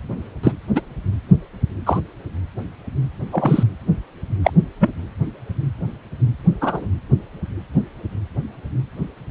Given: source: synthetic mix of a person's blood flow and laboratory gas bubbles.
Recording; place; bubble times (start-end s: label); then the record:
Doppler ultrasound of blood flow; precordium
0.43-0.52 s: bubbles
0.75-0.81 s: bubbles
1.86-2.01 s: bubbles
3.32-3.64 s: bubbles
4.44-4.51 s: bubbles
4.80-4.90 s: bubbles
6.61-6.88 s: bubbles
From the record:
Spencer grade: 2 (many but less than half of the cardiac periods contain bubble signals, singularly or in groups); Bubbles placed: anywhere in the cardiac cycle